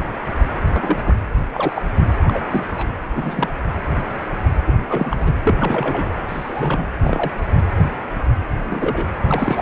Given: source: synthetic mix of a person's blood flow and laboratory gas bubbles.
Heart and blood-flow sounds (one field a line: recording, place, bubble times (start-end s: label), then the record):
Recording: Doppler ultrasound of blood flow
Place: precordium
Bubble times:
0.74-1.16 s: bubbles
1.54-1.82 s: bubbles
2.26-2.47 s: bubbles
2.50-2.65 s: bubbles
2.76-2.87 s: bubbles
3.15-3.49 s: bubbles
4.66-5.31 s: bubbles
5.43-5.55 s: bubbles
5.60-6.20 s: bubbles
6.28-6.87 s: bubbles
7.00-7.32 s: bubbles
8.64-9.08 s: bubbles
9.23-9.62 s: bubbles
From the record:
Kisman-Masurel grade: 232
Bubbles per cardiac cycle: several, 3 to 8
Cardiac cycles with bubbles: 50 to 99%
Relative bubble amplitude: moderate (0.250 to 0.450)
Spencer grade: 3 (all of the cardiac periods contain showers or single bubble signals, but not dominating or overriding the cardiac motion signals)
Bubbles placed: anywhere in the cardiac cycle